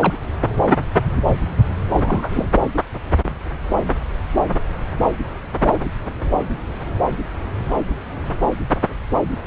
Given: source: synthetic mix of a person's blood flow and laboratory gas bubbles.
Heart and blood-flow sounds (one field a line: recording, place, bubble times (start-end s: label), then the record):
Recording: Doppler ultrasound of blood flow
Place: subclavian vein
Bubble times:
0.00-0.13 s: bubbles
1.94-2.47 s: bubbles
From the record:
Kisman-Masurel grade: 212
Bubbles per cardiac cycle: several, 3 to 8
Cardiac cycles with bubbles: 1 to 10%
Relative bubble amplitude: moderate (0.250 to 0.450)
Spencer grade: 1 (occasional bubble signal discernible with the cardiac motion signal, with majority of cardiac periods free of bubbles)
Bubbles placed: anywhere in the cardiac cycle